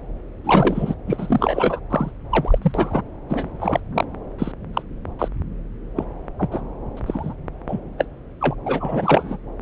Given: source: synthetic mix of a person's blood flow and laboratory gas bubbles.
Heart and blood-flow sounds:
Doppler ultrasound of blood flow; subclavian vein
0.45-0.95 s: bubbles
1.06-1.79 s: bubbles
1.90-2.11 s: bubbles
2.30-2.58 s: bubbles
2.61-3.02 s: bubbles
3.29-3.80 s: bubbles
3.94-4.05 s: bubbles
4.39-4.52 s: bubbles
4.74-4.83 s: bubbles
5.19-5.28 s: bubbles
5.96-6.04 s: bubbles
6.39-6.62 s: bubbles
6.97-7.00 s: bubbles
7.06-7.33 s: bubbles
7.68-7.79 s: bubbles
7.97-8.05 s: bubbles
8.40-8.55 s: bubbles
8.65-9.37 s: bubbles
From the record:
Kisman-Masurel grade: 243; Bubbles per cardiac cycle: several, 3 to 8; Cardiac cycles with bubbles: 100%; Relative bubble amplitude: loud (0.450 to 0.775); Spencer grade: 3 (all of the cardiac periods contain showers or single bubble signals, but not dominating or overriding the cardiac motion signals); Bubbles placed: anywhere in the cardiac cycle

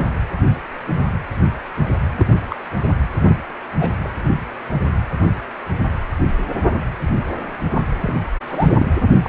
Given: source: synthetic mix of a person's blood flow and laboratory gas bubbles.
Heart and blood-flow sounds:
Doppler ultrasound of blood flow; precordium
0.00-0.11 s: bubbles
2.18-2.25 s: bubbles
2.50-2.56 s: bubbles
3.26-3.37 s: bubbles
3.79-3.96 s: bubbles
4.04-4.09 s: bubbles
7.71-7.82 s: bubbles
8.01-8.21 s: bubbles
8.48-8.69 s: bubbles
8.78-8.87 s: bubbles
9.12-9.29 s: bubbles
From the record:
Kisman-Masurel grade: 222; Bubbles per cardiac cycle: several, 3 to 8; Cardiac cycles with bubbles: 10 to 50%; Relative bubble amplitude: moderate (0.250 to 0.450); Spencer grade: 2 (many but less than half of the cardiac periods contain bubble signals, singularly or in groups); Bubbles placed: anywhere in the cardiac cycle

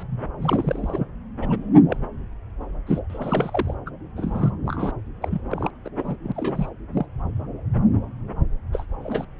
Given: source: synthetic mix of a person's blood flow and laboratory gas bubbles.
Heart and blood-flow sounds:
Doppler ultrasound of blood flow; subclavian vein
0.00-0.03 s: bubbles
0.39-1.07 s: bubbles
1.40-1.57 s: bubbles
1.89-1.97 s: bubbles
2.87-3.00 s: bubbles
3.09-3.75 s: bubbles
3.86-3.89 s: bubbles
4.15-4.50 s: bubbles
4.65-4.92 s: bubbles
5.21-5.41 s: bubbles
5.51-5.71 s: bubbles
5.84-5.89 s: bubbles
5.96-6.16 s: bubbles
6.23-6.32 s: bubbles
6.34-6.68 s: bubbles
6.93-7.05 s: bubbles
8.72-8.86 s: bubbles
9.03-9.25 s: bubbles
From the record:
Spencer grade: 3 (all of the cardiac periods contain showers or single bubble signals, but not dominating or overriding the cardiac motion signals); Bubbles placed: anywhere in the cardiac cycle

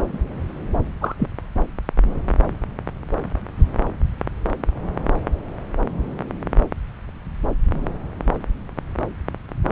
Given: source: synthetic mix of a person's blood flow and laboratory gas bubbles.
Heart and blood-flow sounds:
Doppler ultrasound of blood flow; subclavian vein
0.12-0.18 s: bubbles
1.01-1.28 s: bubbles
From the record:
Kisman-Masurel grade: 123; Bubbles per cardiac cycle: 1 to 2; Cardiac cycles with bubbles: 10 to 50%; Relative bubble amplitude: loud (0.450 to 0.775); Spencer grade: 2 (many but less than half of the cardiac periods contain bubble signals, singularly or in groups); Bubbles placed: anywhere in the cardiac cycle

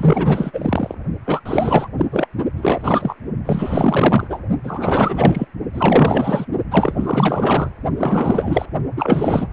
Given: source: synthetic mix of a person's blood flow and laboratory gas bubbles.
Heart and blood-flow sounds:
Doppler ultrasound of blood flow; precordium
0.00-0.95 s: bubbles
1.25-1.41 s: bubbles
1.45-1.88 s: bubbles
1.97-2.06 s: bubbles
2.11-2.27 s: bubbles
2.57-3.16 s: bubbles
3.46-4.40 s: bubbles
4.63-5.45 s: bubbles
5.74-6.46 s: bubbles
6.70-7.71 s: bubbles
7.98-8.65 s: bubbles
8.96-9.47 s: bubbles
From the record:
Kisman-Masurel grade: 444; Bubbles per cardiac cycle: continuous sound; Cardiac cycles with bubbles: 100%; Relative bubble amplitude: maximal (0.775 to 0.999); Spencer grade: 4 (maximum detectable bubble signal sounding continuously throughout systole and diastole of every cardiac period, and overriding the amplitude of the normal cardiac signals); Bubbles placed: only in the low amplitude regions of the cardiac cycle

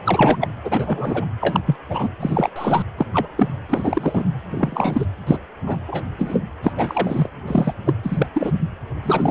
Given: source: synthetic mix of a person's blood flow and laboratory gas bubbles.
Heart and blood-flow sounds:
Doppler ultrasound of blood flow; precordium
0.05-0.48 s: bubbles
0.65-1.29 s: bubbles
1.41-1.60 s: bubbles
1.67-1.76 s: bubbles
1.88-2.09 s: bubbles
2.19-2.50 s: bubbles
2.56-2.83 s: bubbles
2.97-3.06 s: bubbles
3.13-3.27 s: bubbles
3.37-3.48 s: bubbles
3.68-4.24 s: bubbles
4.50-5.05 s: bubbles
5.26-5.38 s: bubbles
5.67-5.78 s: bubbles
5.88-6.03 s: bubbles
6.18-6.43 s: bubbles
6.62-6.72 s: bubbles
6.76-7.29 s: bubbles
7.46-7.74 s: bubbles
7.85-7.94 s: bubbles
8.03-8.26 s: bubbles
8.34-8.51 s: bubbles
9.02-9.31 s: bubbles
From the record:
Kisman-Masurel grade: 243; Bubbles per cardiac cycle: several, 3 to 8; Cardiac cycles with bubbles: 100%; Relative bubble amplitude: loud (0.450 to 0.775); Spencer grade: 3 (all of the cardiac periods contain showers or single bubble signals, but not dominating or overriding the cardiac motion signals); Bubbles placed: anywhere in the cardiac cycle

